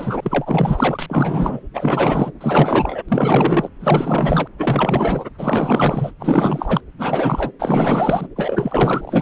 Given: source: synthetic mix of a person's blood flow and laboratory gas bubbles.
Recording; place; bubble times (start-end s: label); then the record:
Doppler ultrasound of blood flow; subclavian vein
0.00-1.60 s: bubbles
1.74-2.31 s: bubbles
2.41-3.02 s: bubbles
3.08-3.69 s: bubbles
3.80-4.47 s: bubbles
4.57-5.25 s: bubbles
5.38-6.11 s: bubbles
6.19-6.81 s: bubbles
6.98-7.51 s: bubbles
7.59-8.27 s: bubbles
8.36-9.22 s: bubbles
From the record:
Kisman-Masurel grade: 444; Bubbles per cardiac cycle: continuous sound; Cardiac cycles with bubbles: 100%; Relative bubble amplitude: maximal (0.775 to 0.999); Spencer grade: 4 (maximum detectable bubble signal sounding continuously throughout systole and diastole of every cardiac period, and overriding the amplitude of the normal cardiac signals); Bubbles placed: anywhere in the cardiac cycle